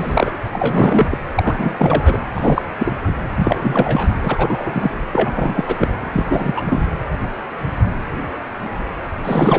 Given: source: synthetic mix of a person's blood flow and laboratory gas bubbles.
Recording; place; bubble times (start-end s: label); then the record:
Doppler ultrasound of blood flow; precordium
0.00-0.37 s: bubbles
0.53-1.18 s: bubbles
1.34-2.25 s: bubbles
2.35-2.62 s: bubbles
2.79-2.94 s: bubbles
3.07-3.12 s: bubbles
3.36-4.14 s: bubbles
4.23-4.71 s: bubbles
4.74-4.91 s: bubbles
5.12-5.89 s: bubbles
6.12-6.62 s: bubbles
6.65-6.83 s: bubbles
9.23-9.59 s: bubbles
From the record:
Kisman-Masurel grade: 333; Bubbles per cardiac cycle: rolling drumbeat, 9 or more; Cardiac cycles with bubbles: 50 to 99%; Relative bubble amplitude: loud (0.450 to 0.775); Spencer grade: 3 (all of the cardiac periods contain showers or single bubble signals, but not dominating or overriding the cardiac motion signals); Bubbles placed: anywhere in the cardiac cycle